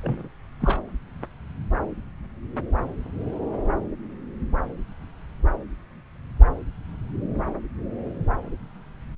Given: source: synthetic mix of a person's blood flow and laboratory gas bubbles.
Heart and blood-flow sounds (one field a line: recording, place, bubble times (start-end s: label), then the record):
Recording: Doppler ultrasound of blood flow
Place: subclavian vein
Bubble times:
0.02-0.28 s: bubbles
0.60-0.79 s: bubbles
From the record:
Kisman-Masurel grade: 211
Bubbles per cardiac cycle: several, 3 to 8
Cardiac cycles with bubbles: 1 to 10%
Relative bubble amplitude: barely perceptible (0.100 to 0.250)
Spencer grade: 1 (occasional bubble signal discernible with the cardiac motion signal, with majority of cardiac periods free of bubbles)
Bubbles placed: anywhere in the cardiac cycle